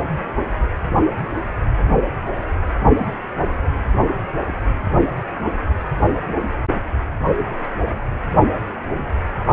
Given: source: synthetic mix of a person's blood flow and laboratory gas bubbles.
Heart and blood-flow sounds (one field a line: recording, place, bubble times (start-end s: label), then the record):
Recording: Doppler ultrasound of blood flow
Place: precordium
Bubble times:
2.95-3.17 s: bubbles
From the record:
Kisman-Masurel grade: 111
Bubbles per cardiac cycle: 1 to 2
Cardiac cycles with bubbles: 1 to 10%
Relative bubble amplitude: barely perceptible (0.100 to 0.250)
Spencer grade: 1 (occasional bubble signal discernible with the cardiac motion signal, with majority of cardiac periods free of bubbles)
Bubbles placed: only in the low amplitude regions of the cardiac cycle